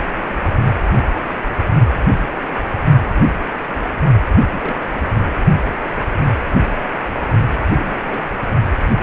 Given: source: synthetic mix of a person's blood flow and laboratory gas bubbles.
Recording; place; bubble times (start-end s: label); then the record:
Doppler ultrasound of blood flow; precordium
4.52-4.79 s: bubbles
4.81-5.03 s: bubbles
7.70-8.02 s: bubbles
8.07-8.21 s: bubbles
From the record:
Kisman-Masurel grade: 221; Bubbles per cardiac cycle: several, 3 to 8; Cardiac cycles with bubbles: 10 to 50%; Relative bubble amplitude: barely perceptible (0.100 to 0.250); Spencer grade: 2 (many but less than half of the cardiac periods contain bubble signals, singularly or in groups); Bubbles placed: only in the low amplitude regions of the cardiac cycle